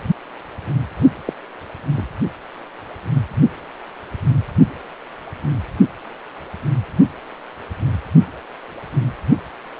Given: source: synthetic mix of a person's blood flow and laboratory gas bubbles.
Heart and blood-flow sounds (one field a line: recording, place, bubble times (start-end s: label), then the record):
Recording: Doppler ultrasound of blood flow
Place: precordium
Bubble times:
1.26-1.33 s: bubbles
1.97-2.07 s: bubbles
From the record:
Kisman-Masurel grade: 112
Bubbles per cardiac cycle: 1 to 2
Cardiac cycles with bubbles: 1 to 10%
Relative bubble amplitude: moderate (0.250 to 0.450)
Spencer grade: 1 (occasional bubble signal discernible with the cardiac motion signal, with majority of cardiac periods free of bubbles)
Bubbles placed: only in the low amplitude regions of the cardiac cycle